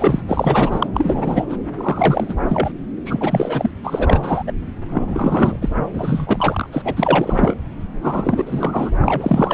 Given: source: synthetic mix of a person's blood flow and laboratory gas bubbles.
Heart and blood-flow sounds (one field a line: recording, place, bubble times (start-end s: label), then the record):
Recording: Doppler ultrasound of blood flow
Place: subclavian vein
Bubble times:
0.00-0.21 s: bubbles
0.27-0.86 s: bubbles
0.94-1.46 s: bubbles
1.49-1.57 s: bubbles
1.75-2.34 s: bubbles
2.49-2.73 s: bubbles
3.05-3.71 s: bubbles
3.83-4.43 s: bubbles
4.46-4.52 s: bubbles
4.90-5.58 s: bubbles
5.61-5.69 s: bubbles
5.93-6.69 s: bubbles
6.72-6.82 s: bubbles
6.84-7.54 s: bubbles
8.03-8.89 s: bubbles
9.01-9.54 s: bubbles
From the record:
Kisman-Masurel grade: 343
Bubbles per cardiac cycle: rolling drumbeat, 9 or more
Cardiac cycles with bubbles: 100%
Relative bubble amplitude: loud (0.450 to 0.775)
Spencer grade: 3 (all of the cardiac periods contain showers or single bubble signals, but not dominating or overriding the cardiac motion signals)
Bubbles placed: anywhere in the cardiac cycle